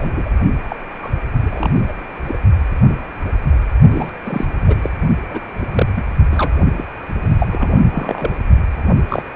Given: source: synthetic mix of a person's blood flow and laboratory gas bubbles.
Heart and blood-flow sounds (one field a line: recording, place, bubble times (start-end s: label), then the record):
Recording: Doppler ultrasound of blood flow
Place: precordium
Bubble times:
0.00-0.31 s: bubbles
0.69-0.76 s: bubbles
1.02-1.09 s: bubbles
1.43-1.93 s: bubbles
2.27-2.38 s: bubbles
3.91-4.09 s: bubbles
4.24-4.46 s: bubbles
4.67-4.75 s: bubbles
4.82-4.89 s: bubbles
5.29-5.40 s: bubbles
5.57-5.67 s: bubbles
5.72-5.86 s: bubbles
5.94-6.04 s: bubbles
6.30-6.50 s: bubbles
6.77-6.85 s: bubbles
7.39-7.87 s: bubbles
7.91-8.34 s: bubbles
9.08-9.22 s: bubbles
9.33-9.36 s: bubbles
From the record:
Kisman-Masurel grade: 232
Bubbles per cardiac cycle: several, 3 to 8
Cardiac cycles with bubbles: 50 to 99%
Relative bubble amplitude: moderate (0.250 to 0.450)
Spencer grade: 3 (all of the cardiac periods contain showers or single bubble signals, but not dominating or overriding the cardiac motion signals)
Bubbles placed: only in the low amplitude regions of the cardiac cycle